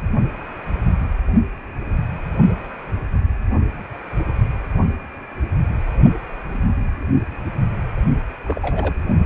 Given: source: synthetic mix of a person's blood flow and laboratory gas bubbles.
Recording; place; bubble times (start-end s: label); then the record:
Doppler ultrasound of blood flow; precordium
8.45-8.95 s: bubbles
From the record:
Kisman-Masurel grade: 211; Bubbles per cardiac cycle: several, 3 to 8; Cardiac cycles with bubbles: 1 to 10%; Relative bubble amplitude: barely perceptible (0.100 to 0.250); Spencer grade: 1 (occasional bubble signal discernible with the cardiac motion signal, with majority of cardiac periods free of bubbles); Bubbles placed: only in the low amplitude regions of the cardiac cycle